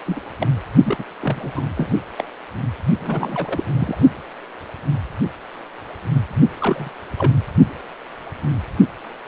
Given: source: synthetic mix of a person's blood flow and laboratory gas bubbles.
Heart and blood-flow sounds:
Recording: Doppler ultrasound of blood flow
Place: precordium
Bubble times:
0.06-0.21 s: bubbles
0.40-0.48 s: bubbles
0.83-1.05 s: bubbles
1.21-1.52 s: bubbles
1.55-1.64 s: bubbles
1.76-1.94 s: bubbles
2.18-2.24 s: bubbles
3.00-3.64 s: bubbles
3.71-3.96 s: bubbles
6.59-6.92 s: bubbles
7.17-7.33 s: bubbles
From the record:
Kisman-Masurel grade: 232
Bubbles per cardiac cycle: several, 3 to 8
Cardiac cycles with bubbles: 50 to 99%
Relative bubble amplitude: moderate (0.250 to 0.450)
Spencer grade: 3 (all of the cardiac periods contain showers or single bubble signals, but not dominating or overriding the cardiac motion signals)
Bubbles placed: only in the low amplitude regions of the cardiac cycle

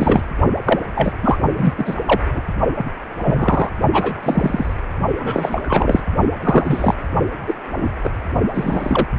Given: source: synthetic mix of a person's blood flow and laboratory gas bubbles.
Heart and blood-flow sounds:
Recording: Doppler ultrasound of blood flow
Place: precordium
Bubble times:
0.00-0.22 s: bubbles
0.65-0.79 s: bubbles
0.95-1.12 s: bubbles
1.23-1.38 s: bubbles
1.55-1.74 s: bubbles
1.77-1.95 s: bubbles
2.05-2.20 s: bubbles
2.34-2.42 s: bubbles
2.76-2.92 s: bubbles
3.22-3.69 s: bubbles
3.92-4.14 s: bubbles
4.23-4.74 s: bubbles
5.19-6.00 s: bubbles
6.44-6.95 s: bubbles
7.47-7.54 s: bubbles
7.76-7.93 s: bubbles
8.04-8.12 s: bubbles
8.54-9.07 s: bubbles
From the record:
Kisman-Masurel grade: 243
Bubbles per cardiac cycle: several, 3 to 8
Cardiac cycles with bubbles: 100%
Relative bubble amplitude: loud (0.450 to 0.775)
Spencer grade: 3 (all of the cardiac periods contain showers or single bubble signals, but not dominating or overriding the cardiac motion signals)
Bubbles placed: only in the low amplitude regions of the cardiac cycle

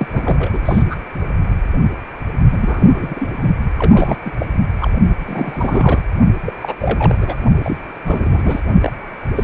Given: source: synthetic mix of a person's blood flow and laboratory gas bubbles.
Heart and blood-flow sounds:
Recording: Doppler ultrasound of blood flow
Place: precordium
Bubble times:
0.00-0.08 s: bubbles
0.11-0.62 s: bubbles
0.65-0.96 s: bubbles
2.52-3.32 s: bubbles
3.42-3.53 s: bubbles
3.78-4.19 s: bubbles
4.24-4.32 s: bubbles
4.39-4.46 s: bubbles
4.80-4.91 s: bubbles
5.26-5.99 s: bubbles
6.46-6.53 s: bubbles
6.61-6.74 s: bubbles
6.79-7.45 s: bubbles
7.63-7.77 s: bubbles
8.05-8.60 s: bubbles
8.80-8.91 s: bubbles
9.35-9.44 s: bubbles
From the record:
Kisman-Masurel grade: 342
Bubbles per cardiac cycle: rolling drumbeat, 9 or more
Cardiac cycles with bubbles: 100%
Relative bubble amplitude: moderate (0.250 to 0.450)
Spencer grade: 3 (all of the cardiac periods contain showers or single bubble signals, but not dominating or overriding the cardiac motion signals)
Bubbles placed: only in the low amplitude regions of the cardiac cycle

